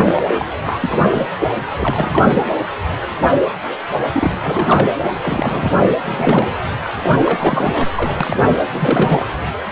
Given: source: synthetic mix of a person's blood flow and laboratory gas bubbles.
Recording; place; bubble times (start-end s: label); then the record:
Doppler ultrasound of blood flow; precordium
0.00-0.21 s: bubbles
0.34-0.49 s: bubbles
0.63-0.99 s: bubbles
1.10-1.28 s: bubbles
1.49-1.54 s: bubbles
1.76-2.46 s: bubbles
4.12-4.32 s: bubbles
4.42-4.92 s: bubbles
5.22-5.96 s: bubbles
6.08-6.61 s: bubbles
6.96-7.90 s: bubbles
7.96-8.18 s: bubbles
8.21-8.37 s: bubbles
8.43-8.54 s: bubbles
8.73-9.24 s: bubbles
From the record:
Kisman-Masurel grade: 332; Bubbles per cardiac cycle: rolling drumbeat, 9 or more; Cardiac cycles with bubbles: 50 to 99%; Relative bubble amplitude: moderate (0.250 to 0.450); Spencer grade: 3 (all of the cardiac periods contain showers or single bubble signals, but not dominating or overriding the cardiac motion signals); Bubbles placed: anywhere in the cardiac cycle